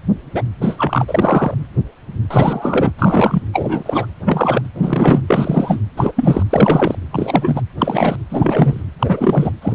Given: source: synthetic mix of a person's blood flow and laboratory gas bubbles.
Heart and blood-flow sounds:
Doppler ultrasound of blood flow; precordium
0.34-0.43 s: bubbles
0.60-1.54 s: bubbles
2.30-2.92 s: bubbles
2.98-3.42 s: bubbles
3.53-4.06 s: bubbles
4.25-4.62 s: bubbles
4.75-5.22 s: bubbles
5.27-5.79 s: bubbles
5.96-6.12 s: bubbles
6.16-6.43 s: bubbles
6.50-6.95 s: bubbles
7.12-7.62 s: bubbles
7.78-8.16 s: bubbles
8.29-8.83 s: bubbles
8.99-9.52 s: bubbles
9.62-9.73 s: bubbles
From the record:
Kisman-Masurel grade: 333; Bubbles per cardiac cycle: rolling drumbeat, 9 or more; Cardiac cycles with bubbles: 50 to 99%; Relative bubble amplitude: loud (0.450 to 0.775); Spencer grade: 3 (all of the cardiac periods contain showers or single bubble signals, but not dominating or overriding the cardiac motion signals); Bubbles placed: anywhere in the cardiac cycle

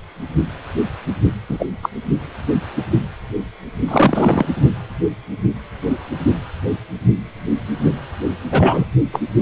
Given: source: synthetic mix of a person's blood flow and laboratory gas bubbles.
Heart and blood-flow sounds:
Doppler ultrasound of blood flow; precordium
1.49-1.66 s: bubbles
1.82-1.89 s: bubbles
3.88-4.46 s: bubbles
8.52-8.87 s: bubbles
9.12-9.20 s: bubbles
From the record:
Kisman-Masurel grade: 223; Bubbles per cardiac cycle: several, 3 to 8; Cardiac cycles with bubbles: 10 to 50%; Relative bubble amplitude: loud (0.450 to 0.775); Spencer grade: 2 (many but less than half of the cardiac periods contain bubble signals, singularly or in groups); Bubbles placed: only in the low amplitude regions of the cardiac cycle

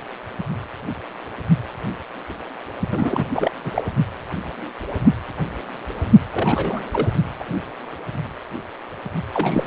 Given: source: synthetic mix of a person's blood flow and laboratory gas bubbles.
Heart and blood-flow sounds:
Doppler ultrasound of blood flow; precordium
2.91-3.28 s: bubbles
3.33-3.52 s: bubbles
3.64-3.84 s: bubbles
6.31-6.82 s: bubbles
6.91-7.08 s: bubbles
7.40-7.43 s: bubbles
9.33-9.67 s: bubbles
From the record:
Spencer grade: 2 (many but less than half of the cardiac periods contain bubble signals, singularly or in groups); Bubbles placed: only in the low amplitude regions of the cardiac cycle

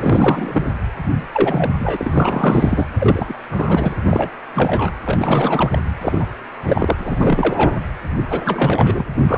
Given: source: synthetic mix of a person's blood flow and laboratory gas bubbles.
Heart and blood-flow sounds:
Doppler ultrasound of blood flow; precordium
0.00-0.70 s: bubbles
1.33-1.72 s: bubbles
1.80-1.97 s: bubbles
1.99-2.87 s: bubbles
2.99-3.34 s: bubbles
3.51-3.95 s: bubbles
4.06-4.31 s: bubbles
4.54-4.91 s: bubbles
5.05-5.81 s: bubbles
5.97-6.31 s: bubbles
6.64-6.94 s: bubbles
6.97-7.76 s: bubbles
8.16-8.23 s: bubbles
8.29-9.06 s: bubbles
9.28-9.38 s: bubbles
From the record:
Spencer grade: 3 (all of the cardiac periods contain showers or single bubble signals, but not dominating or overriding the cardiac motion signals); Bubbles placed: anywhere in the cardiac cycle

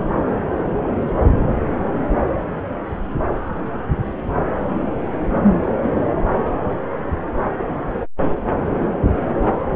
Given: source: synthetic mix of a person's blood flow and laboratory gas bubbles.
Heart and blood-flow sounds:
Doppler ultrasound of blood flow; subclavian vein
5.36-5.42 s: bubbles
From the record:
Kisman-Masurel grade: 111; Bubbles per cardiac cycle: 1 to 2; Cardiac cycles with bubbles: 1 to 10%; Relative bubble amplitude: barely perceptible (0.100 to 0.250); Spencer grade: 1 (occasional bubble signal discernible with the cardiac motion signal, with majority of cardiac periods free of bubbles); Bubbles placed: anywhere in the cardiac cycle

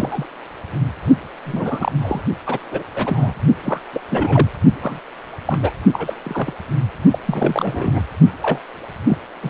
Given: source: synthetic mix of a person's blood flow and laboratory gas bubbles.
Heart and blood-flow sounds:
Doppler ultrasound of blood flow; precordium
0.00-0.26 s: bubbles
1.45-1.92 s: bubbles
2.02-2.22 s: bubbles
2.46-2.59 s: bubbles
2.71-2.83 s: bubbles
2.95-3.35 s: bubbles
3.64-3.80 s: bubbles
3.93-4.00 s: bubbles
4.10-4.48 s: bubbles
4.82-5.00 s: bubbles
5.46-5.71 s: bubbles
5.92-6.13 s: bubbles
6.23-6.53 s: bubbles
7.12-7.19 s: bubbles
7.25-8.01 s: bubbles
8.42-8.61 s: bubbles
9.06-9.18 s: bubbles
9.42-9.50 s: bubbles
From the record:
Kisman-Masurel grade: 232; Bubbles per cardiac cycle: several, 3 to 8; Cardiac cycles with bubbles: 50 to 99%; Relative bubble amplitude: moderate (0.250 to 0.450); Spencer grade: 3 (all of the cardiac periods contain showers or single bubble signals, but not dominating or overriding the cardiac motion signals); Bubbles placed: only in the low amplitude regions of the cardiac cycle

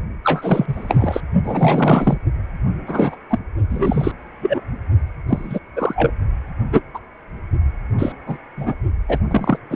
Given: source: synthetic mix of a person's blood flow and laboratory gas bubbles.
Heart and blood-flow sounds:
Doppler ultrasound of blood flow; precordium
0.24-1.21 s: bubbles
1.44-2.18 s: bubbles
2.86-3.17 s: bubbles
3.29-3.39 s: bubbles
3.69-4.11 s: bubbles
4.42-4.61 s: bubbles
5.28-5.59 s: bubbles
5.76-6.11 s: bubbles
6.72-6.81 s: bubbles
6.94-6.99 s: bubbles
7.98-8.12 s: bubbles
8.26-8.38 s: bubbles
8.56-8.74 s: bubbles
9.08-9.19 s: bubbles
9.30-9.59 s: bubbles
9.71-9.76 s: bubbles
From the record:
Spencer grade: 3 (all of the cardiac periods contain showers or single bubble signals, but not dominating or overriding the cardiac motion signals); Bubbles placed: only in the low amplitude regions of the cardiac cycle

